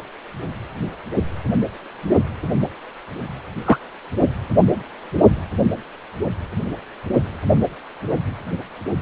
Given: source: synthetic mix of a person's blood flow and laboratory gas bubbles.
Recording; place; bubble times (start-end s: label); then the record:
Doppler ultrasound of blood flow; precordium
3.65-3.78 s: bubbles
From the record:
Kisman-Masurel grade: 113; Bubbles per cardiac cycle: 1 to 2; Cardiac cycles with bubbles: 1 to 10%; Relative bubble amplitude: loud (0.450 to 0.775); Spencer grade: 1 (occasional bubble signal discernible with the cardiac motion signal, with majority of cardiac periods free of bubbles); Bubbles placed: only in the low amplitude regions of the cardiac cycle